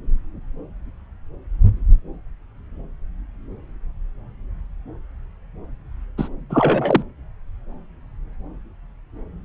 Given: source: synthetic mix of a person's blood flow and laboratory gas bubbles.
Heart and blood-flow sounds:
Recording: Doppler ultrasound of blood flow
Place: subclavian vein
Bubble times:
6.18-6.29 s: bubbles
6.50-7.03 s: bubbles
From the record:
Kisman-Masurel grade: 213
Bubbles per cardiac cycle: several, 3 to 8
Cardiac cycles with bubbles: 1 to 10%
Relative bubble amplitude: loud (0.450 to 0.775)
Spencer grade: 1 (occasional bubble signal discernible with the cardiac motion signal, with majority of cardiac periods free of bubbles)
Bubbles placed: anywhere in the cardiac cycle

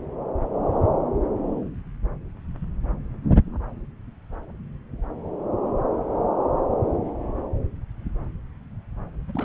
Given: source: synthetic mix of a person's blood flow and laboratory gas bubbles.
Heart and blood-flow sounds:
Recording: Doppler ultrasound of blood flow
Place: subclavian vein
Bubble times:
9.28-9.44 s: bubbles
From the record:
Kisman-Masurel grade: 211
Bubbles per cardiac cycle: several, 3 to 8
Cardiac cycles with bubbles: 1 to 10%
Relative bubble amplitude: barely perceptible (0.100 to 0.250)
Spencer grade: 1 (occasional bubble signal discernible with the cardiac motion signal, with majority of cardiac periods free of bubbles)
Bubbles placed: anywhere in the cardiac cycle

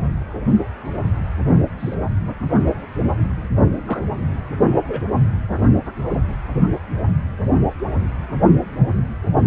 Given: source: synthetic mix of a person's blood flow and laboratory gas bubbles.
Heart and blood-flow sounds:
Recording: Doppler ultrasound of blood flow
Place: precordium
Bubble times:
1.79-1.95 s: bubbles
3.85-3.99 s: bubbles
4.88-5.03 s: bubbles
From the record:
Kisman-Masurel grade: 121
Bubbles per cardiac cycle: 1 to 2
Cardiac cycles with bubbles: 10 to 50%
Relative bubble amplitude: barely perceptible (0.100 to 0.250)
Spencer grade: 2 (many but less than half of the cardiac periods contain bubble signals, singularly or in groups)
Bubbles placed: only in the low amplitude regions of the cardiac cycle

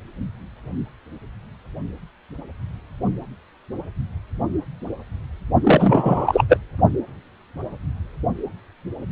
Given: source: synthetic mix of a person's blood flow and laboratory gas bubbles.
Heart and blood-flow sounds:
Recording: Doppler ultrasound of blood flow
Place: precordium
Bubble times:
5.63-6.44 s: bubbles
6.49-6.58 s: bubbles
From the record:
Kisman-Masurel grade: 213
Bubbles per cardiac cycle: several, 3 to 8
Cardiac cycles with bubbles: 1 to 10%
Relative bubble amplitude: loud (0.450 to 0.775)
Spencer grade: 1 (occasional bubble signal discernible with the cardiac motion signal, with majority of cardiac periods free of bubbles)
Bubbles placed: only in the low amplitude regions of the cardiac cycle

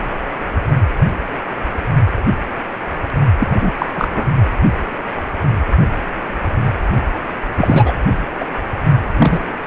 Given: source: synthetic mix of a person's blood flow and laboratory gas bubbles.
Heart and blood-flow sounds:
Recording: Doppler ultrasound of blood flow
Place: precordium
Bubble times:
3.38-3.71 s: bubbles
3.78-3.86 s: bubbles
3.93-4.25 s: bubbles
7.57-7.92 s: bubbles
8.40-8.45 s: bubbles
9.18-9.58 s: bubbles
From the record:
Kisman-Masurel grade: 223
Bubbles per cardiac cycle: several, 3 to 8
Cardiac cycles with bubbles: 10 to 50%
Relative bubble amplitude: loud (0.450 to 0.775)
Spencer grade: 2 (many but less than half of the cardiac periods contain bubble signals, singularly or in groups)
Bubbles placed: only in the low amplitude regions of the cardiac cycle

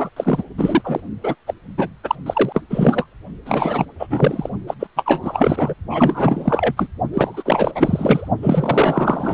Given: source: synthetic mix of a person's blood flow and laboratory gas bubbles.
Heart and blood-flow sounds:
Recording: Doppler ultrasound of blood flow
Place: precordium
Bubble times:
0.00-0.09 s: bubbles
0.16-0.43 s: bubbles
0.57-1.01 s: bubbles
1.23-1.35 s: bubbles
1.47-1.54 s: bubbles
1.78-1.89 s: bubbles
2.03-2.15 s: bubbles
2.26-2.62 s: bubbles
2.69-3.06 s: bubbles
3.45-3.85 s: bubbles
3.99-4.07 s: bubbles
4.10-4.50 s: bubbles
4.67-4.74 s: bubbles
4.79-4.87 s: bubbles
4.96-5.74 s: bubbles
5.89-6.73 s: bubbles
6.76-6.88 s: bubbles
7.13-7.43 s: bubbles
7.46-7.71 s: bubbles
7.75-8.29 s: bubbles
8.42-9.34 s: bubbles
From the record:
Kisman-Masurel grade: 444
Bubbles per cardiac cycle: continuous sound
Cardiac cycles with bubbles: 100%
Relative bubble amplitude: maximal (0.775 to 0.999)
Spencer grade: 4 (maximum detectable bubble signal sounding continuously throughout systole and diastole of every cardiac period, and overriding the amplitude of the normal cardiac signals)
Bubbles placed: only in the low amplitude regions of the cardiac cycle

